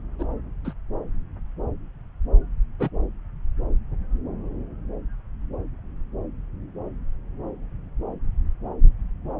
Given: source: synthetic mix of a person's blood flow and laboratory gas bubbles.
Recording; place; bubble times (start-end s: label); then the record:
Doppler ultrasound of blood flow; subclavian vein
0.18-0.24 s: bubbles
0.65-0.73 s: bubbles
2.79-2.90 s: bubbles
From the record:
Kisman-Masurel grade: 121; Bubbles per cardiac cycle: 1 to 2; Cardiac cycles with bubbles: 10 to 50%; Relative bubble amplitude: barely perceptible (0.100 to 0.250); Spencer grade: 2 (many but less than half of the cardiac periods contain bubble signals, singularly or in groups); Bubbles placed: anywhere in the cardiac cycle